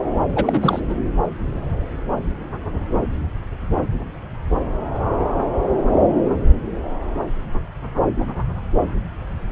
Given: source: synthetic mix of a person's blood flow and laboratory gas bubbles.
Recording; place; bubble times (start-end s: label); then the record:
Doppler ultrasound of blood flow; subclavian vein
0.35-0.81 s: bubbles
0.89-0.94 s: bubbles
From the record:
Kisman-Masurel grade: 213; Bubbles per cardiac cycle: several, 3 to 8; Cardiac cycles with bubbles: 1 to 10%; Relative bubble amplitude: loud (0.450 to 0.775); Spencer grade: 1 (occasional bubble signal discernible with the cardiac motion signal, with majority of cardiac periods free of bubbles); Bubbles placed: anywhere in the cardiac cycle